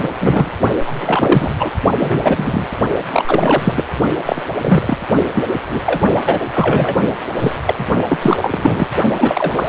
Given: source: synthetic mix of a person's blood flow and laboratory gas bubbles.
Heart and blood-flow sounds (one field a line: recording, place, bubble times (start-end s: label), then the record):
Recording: Doppler ultrasound of blood flow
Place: precordium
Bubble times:
0.00-0.08 s: bubbles
0.20-0.50 s: bubbles
0.86-1.53 s: bubbles
1.58-1.71 s: bubbles
1.99-2.67 s: bubbles
3.12-3.25 s: bubbles
3.27-3.87 s: bubbles
4.25-4.42 s: bubbles
4.61-4.97 s: bubbles
5.16-5.25 s: bubbles
5.33-5.43 s: bubbles
5.70-5.80 s: bubbles
5.86-6.01 s: bubbles
6.26-6.40 s: bubbles
6.54-6.96 s: bubbles
7.38-7.55 s: bubbles
7.67-7.75 s: bubbles
7.78-7.86 s: bubbles
8.09-8.18 s: bubbles
8.22-8.87 s: bubbles
9.16-9.69 s: bubbles
From the record:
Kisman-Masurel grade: 343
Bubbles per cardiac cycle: rolling drumbeat, 9 or more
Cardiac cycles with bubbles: 100%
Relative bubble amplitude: loud (0.450 to 0.775)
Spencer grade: 3 (all of the cardiac periods contain showers or single bubble signals, but not dominating or overriding the cardiac motion signals)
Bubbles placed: only in the low amplitude regions of the cardiac cycle